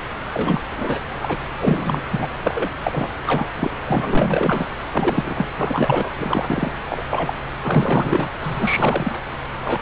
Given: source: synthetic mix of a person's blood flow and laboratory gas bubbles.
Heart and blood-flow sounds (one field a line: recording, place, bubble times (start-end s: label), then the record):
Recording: Doppler ultrasound of blood flow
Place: subclavian vein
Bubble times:
0.34-0.60 s: bubbles
0.78-0.99 s: bubbles
1.22-1.37 s: bubbles
1.58-2.01 s: bubbles
2.11-2.28 s: bubbles
2.44-2.71 s: bubbles
2.83-3.10 s: bubbles
3.27-3.47 s: bubbles
3.59-3.71 s: bubbles
3.88-4.68 s: bubbles
4.92-5.50 s: bubbles
5.56-6.13 s: bubbles
6.18-6.71 s: bubbles
6.89-7.31 s: bubbles
7.61-8.29 s: bubbles
8.42-9.21 s: bubbles
9.64-9.82 s: bubbles
From the record:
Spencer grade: 3 (all of the cardiac periods contain showers or single bubble signals, but not dominating or overriding the cardiac motion signals)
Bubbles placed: anywhere in the cardiac cycle